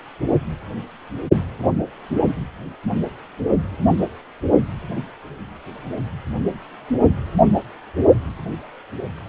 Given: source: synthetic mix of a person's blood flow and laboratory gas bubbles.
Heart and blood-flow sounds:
Doppler ultrasound of blood flow; precordium
no bubbles
From the record:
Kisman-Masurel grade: 000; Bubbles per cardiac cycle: 0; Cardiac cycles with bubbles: 0%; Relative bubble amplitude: no bubbles discernible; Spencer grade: 0 (complete lack of bubble signals)

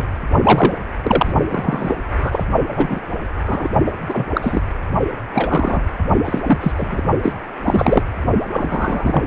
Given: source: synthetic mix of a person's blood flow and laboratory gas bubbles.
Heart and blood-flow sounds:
Doppler ultrasound of blood flow; precordium
0.00-0.04 s: bubbles
0.43-0.74 s: bubbles
1.04-1.33 s: bubbles
1.50-1.94 s: bubbles
2.18-2.44 s: bubbles
2.71-3.00 s: bubbles
3.46-3.68 s: bubbles
3.86-3.91 s: bubbles
4.08-4.26 s: bubbles
4.34-4.62 s: bubbles
5.33-5.82 s: bubbles
6.25-6.41 s: bubbles
6.46-7.01 s: bubbles
7.22-7.34 s: bubbles
7.65-8.03 s: bubbles
8.51-9.26 s: bubbles
From the record:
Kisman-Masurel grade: 243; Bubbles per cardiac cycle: several, 3 to 8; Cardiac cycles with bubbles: 100%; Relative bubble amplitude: loud (0.450 to 0.775); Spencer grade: 3 (all of the cardiac periods contain showers or single bubble signals, but not dominating or overriding the cardiac motion signals); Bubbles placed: only in the low amplitude regions of the cardiac cycle

